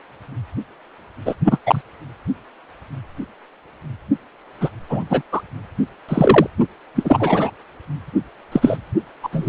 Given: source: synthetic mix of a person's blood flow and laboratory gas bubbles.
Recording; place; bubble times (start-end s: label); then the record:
Doppler ultrasound of blood flow; precordium
1.25-1.35 s: bubbles
1.44-1.58 s: bubbles
1.66-1.81 s: bubbles
4.61-4.70 s: bubbles
4.89-5.04 s: bubbles
5.10-5.22 s: bubbles
5.32-5.41 s: bubbles
6.08-6.46 s: bubbles
6.95-7.50 s: bubbles
8.51-8.76 s: bubbles
9.23-9.29 s: bubbles
9.32-9.49 s: bubbles
From the record:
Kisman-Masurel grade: 233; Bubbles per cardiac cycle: several, 3 to 8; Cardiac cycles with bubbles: 50 to 99%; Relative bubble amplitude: loud (0.450 to 0.775); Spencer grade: 3 (all of the cardiac periods contain showers or single bubble signals, but not dominating or overriding the cardiac motion signals); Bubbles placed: anywhere in the cardiac cycle